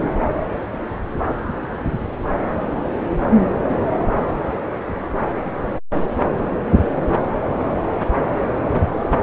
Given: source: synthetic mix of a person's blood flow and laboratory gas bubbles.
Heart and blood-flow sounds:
Doppler ultrasound of blood flow; subclavian vein
no bubbles
From the record:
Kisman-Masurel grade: 000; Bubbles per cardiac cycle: 0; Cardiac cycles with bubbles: 0%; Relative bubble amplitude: no bubbles discernible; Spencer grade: 0 (complete lack of bubble signals)

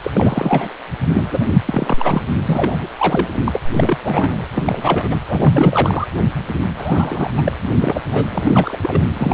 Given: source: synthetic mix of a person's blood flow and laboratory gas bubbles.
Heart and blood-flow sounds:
Doppler ultrasound of blood flow; precordium
0.02-0.10 s: bubbles
0.14-0.73 s: bubbles
1.14-1.26 s: bubbles
1.31-1.47 s: bubbles
1.66-2.22 s: bubbles
2.45-2.88 s: bubbles
2.98-3.28 s: bubbles
3.44-3.60 s: bubbles
3.74-3.98 s: bubbles
4.03-4.47 s: bubbles
4.54-5.17 s: bubbles
5.25-6.07 s: bubbles
6.77-7.31 s: bubbles
7.37-7.52 s: bubbles
7.81-8.02 s: bubbles
8.11-8.27 s: bubbles
8.30-8.79 s: bubbles
8.81-9.02 s: bubbles
9.13-9.34 s: bubbles
From the record:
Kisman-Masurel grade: 342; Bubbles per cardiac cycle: rolling drumbeat, 9 or more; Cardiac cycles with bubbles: 100%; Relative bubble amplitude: moderate (0.250 to 0.450); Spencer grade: 3 (all of the cardiac periods contain showers or single bubble signals, but not dominating or overriding the cardiac motion signals); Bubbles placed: anywhere in the cardiac cycle

